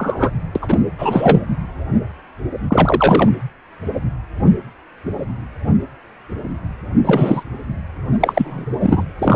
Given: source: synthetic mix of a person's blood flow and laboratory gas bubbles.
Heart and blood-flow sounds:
Doppler ultrasound of blood flow; precordium
0.00-0.30 s: bubbles
0.55-0.79 s: bubbles
0.98-1.42 s: bubbles
2.69-3.29 s: bubbles
7.04-7.43 s: bubbles
8.20-8.66 s: bubbles
8.80-9.04 s: bubbles
9.19-9.36 s: bubbles
From the record:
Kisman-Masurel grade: 233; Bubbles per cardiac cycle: several, 3 to 8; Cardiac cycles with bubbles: 50 to 99%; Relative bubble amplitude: loud (0.450 to 0.775); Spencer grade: 3 (all of the cardiac periods contain showers or single bubble signals, but not dominating or overriding the cardiac motion signals); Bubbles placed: anywhere in the cardiac cycle

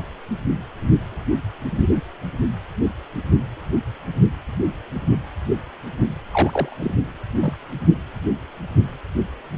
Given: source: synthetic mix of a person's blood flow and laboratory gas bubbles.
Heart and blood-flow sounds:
Doppler ultrasound of blood flow; precordium
6.30-6.94 s: bubbles
7.41-7.57 s: bubbles
From the record:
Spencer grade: 2 (many but less than half of the cardiac periods contain bubble signals, singularly or in groups); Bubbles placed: anywhere in the cardiac cycle

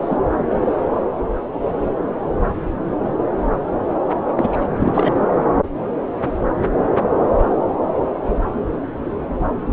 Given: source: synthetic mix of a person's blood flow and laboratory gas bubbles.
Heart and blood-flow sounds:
Doppler ultrasound of blood flow; subclavian vein
0.00-0.17 s: bubbles
4.37-4.68 s: bubbles
4.80-5.14 s: bubbles
From the record:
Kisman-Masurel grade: 222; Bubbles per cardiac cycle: several, 3 to 8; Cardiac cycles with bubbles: 10 to 50%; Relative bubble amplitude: moderate (0.250 to 0.450); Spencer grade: 2 (many but less than half of the cardiac periods contain bubble signals, singularly or in groups); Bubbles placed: anywhere in the cardiac cycle

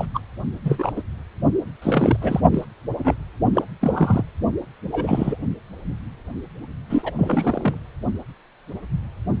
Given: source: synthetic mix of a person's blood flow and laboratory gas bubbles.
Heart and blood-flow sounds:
Doppler ultrasound of blood flow; precordium
0.00-0.06 s: bubbles
0.14-0.20 s: bubbles
0.65-0.92 s: bubbles
0.96-1.02 s: bubbles
1.82-2.17 s: bubbles
2.21-2.40 s: bubbles
2.51-2.65 s: bubbles
2.98-3.15 s: bubbles
3.54-3.62 s: bubbles
3.80-4.24 s: bubbles
4.92-5.38 s: bubbles
6.89-7.12 s: bubbles
7.18-7.78 s: bubbles
From the record:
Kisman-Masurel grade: 233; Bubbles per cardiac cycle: several, 3 to 8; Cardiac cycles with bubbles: 50 to 99%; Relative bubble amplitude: loud (0.450 to 0.775); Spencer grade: 3 (all of the cardiac periods contain showers or single bubble signals, but not dominating or overriding the cardiac motion signals); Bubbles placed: only in the low amplitude regions of the cardiac cycle

